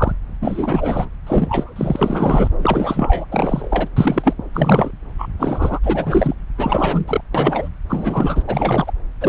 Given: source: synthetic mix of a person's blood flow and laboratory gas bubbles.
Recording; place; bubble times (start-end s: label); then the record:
Doppler ultrasound of blood flow; subclavian vein
0.00-0.12 s: bubbles
0.42-1.09 s: bubbles
1.27-2.48 s: bubbles
2.58-3.25 s: bubbles
3.31-3.88 s: bubbles
3.96-4.33 s: bubbles
4.54-4.91 s: bubbles
5.18-5.28 s: bubbles
5.39-5.79 s: bubbles
5.83-6.34 s: bubbles
6.58-7.21 s: bubbles
7.34-7.68 s: bubbles
7.89-8.42 s: bubbles
8.47-8.92 s: bubbles
9.21-9.29 s: bubbles
From the record:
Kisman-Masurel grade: 343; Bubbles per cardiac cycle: rolling drumbeat, 9 or more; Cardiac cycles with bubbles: 100%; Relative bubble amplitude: loud (0.450 to 0.775); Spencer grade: 3 (all of the cardiac periods contain showers or single bubble signals, but not dominating or overriding the cardiac motion signals); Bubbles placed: anywhere in the cardiac cycle